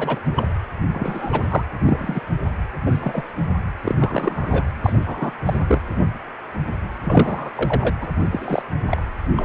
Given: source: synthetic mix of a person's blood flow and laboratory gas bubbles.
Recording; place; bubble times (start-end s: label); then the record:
Doppler ultrasound of blood flow; precordium
0.00-0.19 s: bubbles
0.35-0.47 s: bubbles
0.93-1.64 s: bubbles
1.79-2.21 s: bubbles
2.85-2.98 s: bubbles
3.01-3.23 s: bubbles
3.81-4.64 s: bubbles
4.84-4.92 s: bubbles
5.05-5.31 s: bubbles
5.45-5.57 s: bubbles
5.67-5.81 s: bubbles
7.03-7.51 s: bubbles
7.55-7.93 s: bubbles
8.01-8.08 s: bubbles
8.31-8.62 s: bubbles
8.90-9.03 s: bubbles
9.36-9.45 s: bubbles
From the record:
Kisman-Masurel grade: 233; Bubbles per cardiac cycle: several, 3 to 8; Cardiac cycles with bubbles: 50 to 99%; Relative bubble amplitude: loud (0.450 to 0.775); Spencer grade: 3 (all of the cardiac periods contain showers or single bubble signals, but not dominating or overriding the cardiac motion signals); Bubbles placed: anywhere in the cardiac cycle